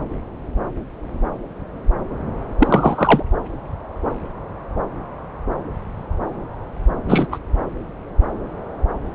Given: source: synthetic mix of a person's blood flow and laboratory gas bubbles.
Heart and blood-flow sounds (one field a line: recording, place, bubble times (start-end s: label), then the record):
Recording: Doppler ultrasound of blood flow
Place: subclavian vein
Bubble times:
2.58-3.23 s: bubbles
7.08-7.26 s: bubbles
7.31-7.38 s: bubbles
From the record:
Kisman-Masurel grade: 213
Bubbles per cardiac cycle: several, 3 to 8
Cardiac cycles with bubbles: 1 to 10%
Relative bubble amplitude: loud (0.450 to 0.775)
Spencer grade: 1 (occasional bubble signal discernible with the cardiac motion signal, with majority of cardiac periods free of bubbles)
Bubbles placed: anywhere in the cardiac cycle